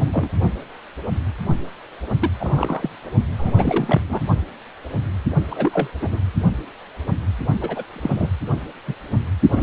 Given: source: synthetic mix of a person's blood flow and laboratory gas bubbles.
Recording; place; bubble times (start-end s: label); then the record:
Doppler ultrasound of blood flow; precordium
0.00-0.30 s: bubbles
2.20-2.30 s: bubbles
2.40-2.90 s: bubbles
3.38-3.54 s: bubbles
3.57-4.00 s: bubbles
4.08-4.21 s: bubbles
5.50-5.88 s: bubbles
6.01-6.19 s: bubbles
7.60-7.83 s: bubbles
7.92-8.29 s: bubbles
8.87-8.95 s: bubbles
9.50-9.63 s: bubbles
From the record:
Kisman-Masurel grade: 232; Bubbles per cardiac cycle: several, 3 to 8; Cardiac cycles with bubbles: 50 to 99%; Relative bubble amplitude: moderate (0.250 to 0.450); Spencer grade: 3 (all of the cardiac periods contain showers or single bubble signals, but not dominating or overriding the cardiac motion signals); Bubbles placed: only in the low amplitude regions of the cardiac cycle